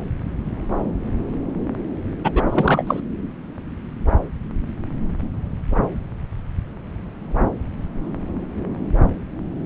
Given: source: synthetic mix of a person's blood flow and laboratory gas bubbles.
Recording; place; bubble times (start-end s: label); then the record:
Doppler ultrasound of blood flow; subclavian vein
2.24-2.31 s: bubbles
2.34-2.43 s: bubbles
2.50-3.00 s: bubbles
From the record:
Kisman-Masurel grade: 213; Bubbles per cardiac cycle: several, 3 to 8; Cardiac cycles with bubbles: 1 to 10%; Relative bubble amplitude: loud (0.450 to 0.775); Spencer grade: 1 (occasional bubble signal discernible with the cardiac motion signal, with majority of cardiac periods free of bubbles); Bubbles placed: anywhere in the cardiac cycle